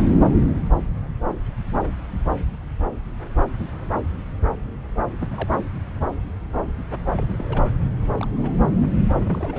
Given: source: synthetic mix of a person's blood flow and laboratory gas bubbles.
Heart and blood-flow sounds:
Doppler ultrasound of blood flow; subclavian vein
5.21-5.48 s: bubbles
7.17-7.26 s: bubbles
7.29-7.63 s: bubbles
8.13-8.28 s: bubbles
8.36-8.53 s: bubbles
9.25-9.59 s: bubbles
From the record:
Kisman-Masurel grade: 221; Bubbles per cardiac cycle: several, 3 to 8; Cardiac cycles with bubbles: 10 to 50%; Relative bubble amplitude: barely perceptible (0.100 to 0.250); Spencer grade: 2 (many but less than half of the cardiac periods contain bubble signals, singularly or in groups); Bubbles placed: anywhere in the cardiac cycle

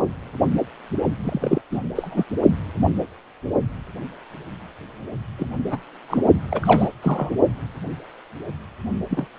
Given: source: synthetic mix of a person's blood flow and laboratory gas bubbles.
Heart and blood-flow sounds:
Doppler ultrasound of blood flow; precordium
1.23-1.61 s: bubbles
1.71-1.80 s: bubbles
1.95-2.24 s: bubbles
5.38-5.50 s: bubbles
5.70-5.78 s: bubbles
6.09-6.23 s: bubbles
6.50-6.89 s: bubbles
7.02-7.30 s: bubbles
9.11-9.26 s: bubbles
From the record:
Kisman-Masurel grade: 222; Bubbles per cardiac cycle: several, 3 to 8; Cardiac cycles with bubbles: 10 to 50%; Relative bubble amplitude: moderate (0.250 to 0.450); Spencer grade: 2 (many but less than half of the cardiac periods contain bubble signals, singularly or in groups); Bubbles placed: only in the low amplitude regions of the cardiac cycle

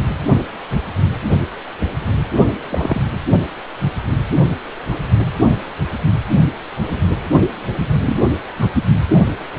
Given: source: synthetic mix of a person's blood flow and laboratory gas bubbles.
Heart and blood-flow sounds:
Doppler ultrasound of blood flow; precordium
2.70-3.02 s: bubbles
8.05-8.30 s: bubbles
8.58-8.70 s: bubbles
From the record:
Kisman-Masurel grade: 122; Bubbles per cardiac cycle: 1 to 2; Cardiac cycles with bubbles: 10 to 50%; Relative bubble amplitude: moderate (0.250 to 0.450); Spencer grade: 2 (many but less than half of the cardiac periods contain bubble signals, singularly or in groups); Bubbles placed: only in the low amplitude regions of the cardiac cycle

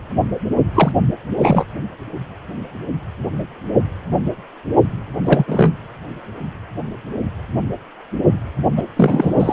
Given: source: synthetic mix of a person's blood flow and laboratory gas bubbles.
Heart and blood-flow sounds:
Doppler ultrasound of blood flow; precordium
0.74-0.92 s: bubbles
1.39-1.65 s: bubbles
5.25-5.44 s: bubbles
5.47-5.74 s: bubbles
8.77-8.83 s: bubbles
8.96-9.53 s: bubbles
From the record:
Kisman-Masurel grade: 223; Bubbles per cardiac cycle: several, 3 to 8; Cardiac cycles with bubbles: 10 to 50%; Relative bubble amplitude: loud (0.450 to 0.775); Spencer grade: 2 (many but less than half of the cardiac periods contain bubble signals, singularly or in groups); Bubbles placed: anywhere in the cardiac cycle

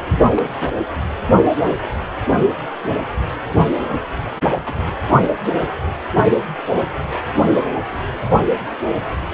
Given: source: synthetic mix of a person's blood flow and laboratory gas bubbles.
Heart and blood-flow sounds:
Doppler ultrasound of blood flow; precordium
0.35-0.72 s: bubbles
4.65-4.74 s: bubbles
4.86-4.94 s: bubbles
From the record:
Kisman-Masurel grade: 121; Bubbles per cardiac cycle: 1 to 2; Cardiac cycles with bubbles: 10 to 50%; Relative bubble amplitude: barely perceptible (0.100 to 0.250); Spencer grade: 2 (many but less than half of the cardiac periods contain bubble signals, singularly or in groups); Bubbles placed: anywhere in the cardiac cycle

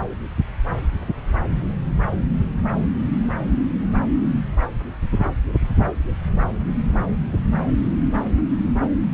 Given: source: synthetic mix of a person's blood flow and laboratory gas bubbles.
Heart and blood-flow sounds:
Doppler ultrasound of blood flow; subclavian vein
6.99-7.07 s: bubbles
From the record:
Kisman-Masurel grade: 111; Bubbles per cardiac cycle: 1 to 2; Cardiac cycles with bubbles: 1 to 10%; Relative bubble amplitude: barely perceptible (0.100 to 0.250); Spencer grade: 1 (occasional bubble signal discernible with the cardiac motion signal, with majority of cardiac periods free of bubbles); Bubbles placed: anywhere in the cardiac cycle

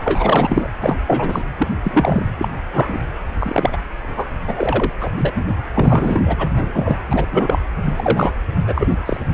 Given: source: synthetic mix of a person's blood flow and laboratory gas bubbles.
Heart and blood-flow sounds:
Doppler ultrasound of blood flow; precordium
0.03-0.68 s: bubbles
0.80-0.97 s: bubbles
1.06-1.42 s: bubbles
1.58-1.67 s: bubbles
1.83-2.24 s: bubbles
2.38-2.48 s: bubbles
2.73-3.00 s: bubbles
3.38-3.77 s: bubbles
4.03-4.29 s: bubbles
4.47-4.93 s: bubbles
5.00-5.11 s: bubbles
5.16-5.42 s: bubbles
5.75-6.49 s: bubbles
6.56-6.95 s: bubbles
7.10-7.26 s: bubbles
7.31-7.59 s: bubbles
7.86-8.32 s: bubbles
8.67-8.87 s: bubbles
9.05-9.17 s: bubbles
From the record:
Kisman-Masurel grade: 243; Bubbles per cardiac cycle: several, 3 to 8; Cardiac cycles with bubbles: 100%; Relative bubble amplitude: loud (0.450 to 0.775); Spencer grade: 3 (all of the cardiac periods contain showers or single bubble signals, but not dominating or overriding the cardiac motion signals); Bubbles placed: anywhere in the cardiac cycle

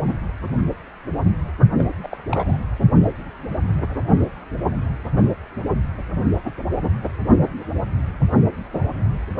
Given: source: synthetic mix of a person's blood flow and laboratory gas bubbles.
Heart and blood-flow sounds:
Doppler ultrasound of blood flow; precordium
1.79-1.85 s: bubbles
2.03-2.17 s: bubbles
2.31-2.57 s: bubbles
From the record:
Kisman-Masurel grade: 211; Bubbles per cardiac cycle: several, 3 to 8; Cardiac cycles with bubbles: 1 to 10%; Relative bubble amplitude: barely perceptible (0.100 to 0.250); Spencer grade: 1 (occasional bubble signal discernible with the cardiac motion signal, with majority of cardiac periods free of bubbles); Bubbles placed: anywhere in the cardiac cycle

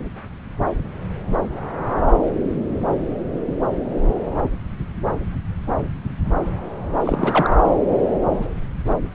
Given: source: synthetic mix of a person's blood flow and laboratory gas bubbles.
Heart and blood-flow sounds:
Doppler ultrasound of blood flow; subclavian vein
7.04-7.55 s: bubbles
From the record:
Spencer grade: 1 (occasional bubble signal discernible with the cardiac motion signal, with majority of cardiac periods free of bubbles); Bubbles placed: anywhere in the cardiac cycle

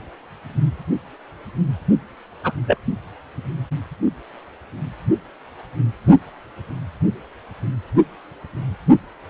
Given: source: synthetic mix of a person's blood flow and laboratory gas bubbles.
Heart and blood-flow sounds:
Doppler ultrasound of blood flow; precordium
2.44-2.52 s: bubbles
2.67-2.77 s: bubbles
From the record:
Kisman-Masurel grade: 122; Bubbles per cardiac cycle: 1 to 2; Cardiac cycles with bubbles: 10 to 50%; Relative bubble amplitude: moderate (0.250 to 0.450); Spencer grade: 2 (many but less than half of the cardiac periods contain bubble signals, singularly or in groups); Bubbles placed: only in the low amplitude regions of the cardiac cycle

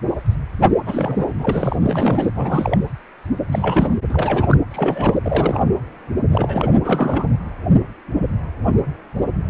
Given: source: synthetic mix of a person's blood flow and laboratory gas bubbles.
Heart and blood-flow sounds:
Doppler ultrasound of blood flow; precordium
0.85-1.29 s: bubbles
1.39-1.76 s: bubbles
1.83-2.31 s: bubbles
2.35-2.77 s: bubbles
3.51-3.95 s: bubbles
4.09-4.57 s: bubbles
4.71-5.19 s: bubbles
5.24-5.63 s: bubbles
6.31-6.71 s: bubbles
6.81-7.29 s: bubbles
From the record:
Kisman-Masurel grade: 332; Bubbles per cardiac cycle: rolling drumbeat, 9 or more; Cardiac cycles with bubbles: 50 to 99%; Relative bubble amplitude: moderate (0.250 to 0.450); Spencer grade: 3 (all of the cardiac periods contain showers or single bubble signals, but not dominating or overriding the cardiac motion signals); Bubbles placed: anywhere in the cardiac cycle

